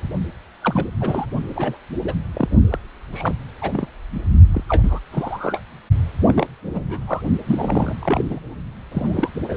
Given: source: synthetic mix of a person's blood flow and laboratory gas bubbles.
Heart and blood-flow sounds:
Doppler ultrasound of blood flow; precordium
0.61-0.86 s: bubbles
1.00-1.25 s: bubbles
1.54-1.77 s: bubbles
2.03-2.14 s: bubbles
2.33-2.49 s: bubbles
2.70-2.79 s: bubbles
3.12-3.33 s: bubbles
3.61-3.87 s: bubbles
4.09-4.28 s: bubbles
4.53-4.63 s: bubbles
4.68-5.00 s: bubbles
5.12-5.61 s: bubbles
6.23-6.46 s: bubbles
6.73-6.99 s: bubbles
7.07-7.21 s: bubbles
7.46-7.95 s: bubbles
8.00-8.40 s: bubbles
8.92-9.30 s: bubbles
9.37-9.57 s: bubbles
From the record:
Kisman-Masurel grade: 242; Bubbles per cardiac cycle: several, 3 to 8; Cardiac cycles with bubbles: 100%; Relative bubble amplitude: moderate (0.250 to 0.450); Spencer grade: 3 (all of the cardiac periods contain showers or single bubble signals, but not dominating or overriding the cardiac motion signals); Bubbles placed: only in the low amplitude regions of the cardiac cycle

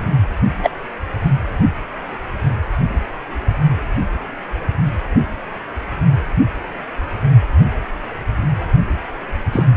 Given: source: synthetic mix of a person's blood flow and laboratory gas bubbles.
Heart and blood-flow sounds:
Doppler ultrasound of blood flow; precordium
0.62-0.70 s: bubbles
9.53-9.65 s: bubbles
From the record:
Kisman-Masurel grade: 123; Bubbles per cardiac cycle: 1 to 2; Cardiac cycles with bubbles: 10 to 50%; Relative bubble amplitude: loud (0.450 to 0.775); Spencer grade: 2 (many but less than half of the cardiac periods contain bubble signals, singularly or in groups); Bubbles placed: only in the low amplitude regions of the cardiac cycle

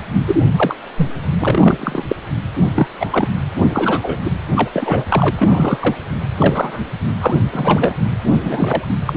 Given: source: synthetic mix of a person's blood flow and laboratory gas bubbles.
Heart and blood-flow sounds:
Doppler ultrasound of blood flow; precordium
0.28-0.38 s: bubbles
0.56-0.75 s: bubbles
0.96-1.07 s: bubbles
1.40-2.03 s: bubbles
2.09-2.16 s: bubbles
2.74-2.87 s: bubbles
3.00-3.31 s: bubbles
3.62-3.69 s: bubbles
3.73-4.20 s: bubbles
4.25-4.31 s: bubbles
4.56-4.70 s: bubbles
4.74-5.31 s: bubbles
5.36-5.95 s: bubbles
6.38-6.82 s: bubbles
7.21-7.40 s: bubbles
7.53-7.95 s: bubbles
8.30-8.88 s: bubbles
9.05-9.13 s: bubbles
From the record:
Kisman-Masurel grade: 243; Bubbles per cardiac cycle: several, 3 to 8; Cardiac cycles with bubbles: 100%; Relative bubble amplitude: loud (0.450 to 0.775); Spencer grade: 3 (all of the cardiac periods contain showers or single bubble signals, but not dominating or overriding the cardiac motion signals); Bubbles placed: anywhere in the cardiac cycle

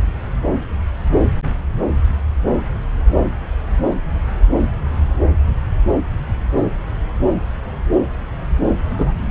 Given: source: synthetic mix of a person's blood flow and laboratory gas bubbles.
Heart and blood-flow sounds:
Doppler ultrasound of blood flow; subclavian vein
8.98-9.12 s: bubbles
From the record:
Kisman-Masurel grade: 113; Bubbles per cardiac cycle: 1 to 2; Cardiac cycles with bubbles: 1 to 10%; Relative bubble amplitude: loud (0.450 to 0.775); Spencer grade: 1 (occasional bubble signal discernible with the cardiac motion signal, with majority of cardiac periods free of bubbles); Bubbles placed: anywhere in the cardiac cycle

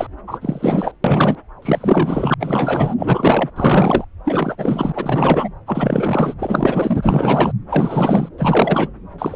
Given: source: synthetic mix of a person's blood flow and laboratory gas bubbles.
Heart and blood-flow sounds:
Doppler ultrasound of blood flow; subclavian vein
0.00-0.07 s: bubbles
0.27-0.38 s: bubbles
0.41-0.92 s: bubbles
1.04-1.36 s: bubbles
1.62-2.34 s: bubbles
2.40-2.94 s: bubbles
2.98-3.50 s: bubbles
3.56-4.04 s: bubbles
4.25-4.92 s: bubbles
4.95-5.48 s: bubbles
5.67-6.34 s: bubbles
6.38-7.52 s: bubbles
7.69-8.29 s: bubbles
8.38-8.88 s: bubbles
9.18-9.36 s: bubbles
From the record:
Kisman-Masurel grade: 444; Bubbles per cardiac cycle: continuous sound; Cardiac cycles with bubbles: 100%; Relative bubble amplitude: maximal (0.775 to 0.999); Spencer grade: 4 (maximum detectable bubble signal sounding continuously throughout systole and diastole of every cardiac period, and overriding the amplitude of the normal cardiac signals); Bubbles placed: anywhere in the cardiac cycle

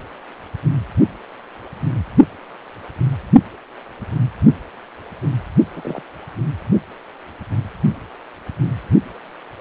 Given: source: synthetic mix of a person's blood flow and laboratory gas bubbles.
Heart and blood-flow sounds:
Doppler ultrasound of blood flow; precordium
5.73-6.02 s: bubbles
From the record:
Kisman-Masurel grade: 121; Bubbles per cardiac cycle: 1 to 2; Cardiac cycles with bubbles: 10 to 50%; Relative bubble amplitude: barely perceptible (0.100 to 0.250); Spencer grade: 2 (many but less than half of the cardiac periods contain bubble signals, singularly or in groups); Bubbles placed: only in the low amplitude regions of the cardiac cycle

